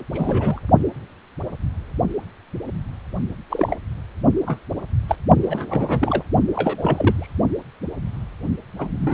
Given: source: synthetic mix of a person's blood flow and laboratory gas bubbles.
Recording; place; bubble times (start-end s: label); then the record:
Doppler ultrasound of blood flow; precordium
0.13-0.59 s: bubbles
3.50-3.76 s: bubbles
4.46-4.59 s: bubbles
5.08-5.16 s: bubbles
5.42-6.25 s: bubbles
6.55-7.33 s: bubbles
8.78-8.94 s: bubbles
8.98-9.13 s: bubbles
From the record:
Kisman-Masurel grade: 232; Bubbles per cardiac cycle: several, 3 to 8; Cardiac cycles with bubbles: 50 to 99%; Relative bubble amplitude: moderate (0.250 to 0.450); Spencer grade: 3 (all of the cardiac periods contain showers or single bubble signals, but not dominating or overriding the cardiac motion signals); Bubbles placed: only in the low amplitude regions of the cardiac cycle